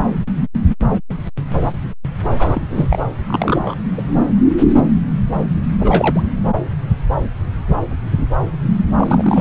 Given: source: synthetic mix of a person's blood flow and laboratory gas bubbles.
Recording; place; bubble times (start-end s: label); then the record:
Doppler ultrasound of blood flow; subclavian vein
2.39-3.07 s: bubbles
3.27-3.75 s: bubbles
3.96-4.17 s: bubbles
5.79-6.21 s: bubbles
8.97-9.41 s: bubbles
From the record:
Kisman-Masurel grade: 222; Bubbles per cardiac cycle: several, 3 to 8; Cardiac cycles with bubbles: 10 to 50%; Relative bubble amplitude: moderate (0.250 to 0.450); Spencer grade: 2 (many but less than half of the cardiac periods contain bubble signals, singularly or in groups); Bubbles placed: anywhere in the cardiac cycle